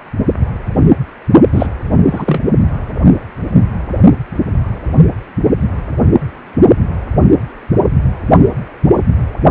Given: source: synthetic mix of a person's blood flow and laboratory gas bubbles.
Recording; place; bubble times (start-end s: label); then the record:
Doppler ultrasound of blood flow; precordium
1.52-1.67 s: bubbles
2.05-2.41 s: bubbles
From the record:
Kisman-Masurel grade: 213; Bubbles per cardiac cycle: several, 3 to 8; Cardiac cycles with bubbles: 1 to 10%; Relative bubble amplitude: loud (0.450 to 0.775); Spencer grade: 1 (occasional bubble signal discernible with the cardiac motion signal, with majority of cardiac periods free of bubbles); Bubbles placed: only in the low amplitude regions of the cardiac cycle